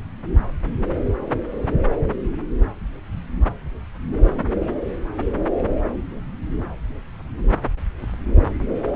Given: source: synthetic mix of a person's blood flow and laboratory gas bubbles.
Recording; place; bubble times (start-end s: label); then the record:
Doppler ultrasound of blood flow; subclavian vein
no bubbles
From the record:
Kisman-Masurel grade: 000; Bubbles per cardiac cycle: 0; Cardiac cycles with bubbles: 0%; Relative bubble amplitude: no bubbles discernible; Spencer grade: 0 (complete lack of bubble signals)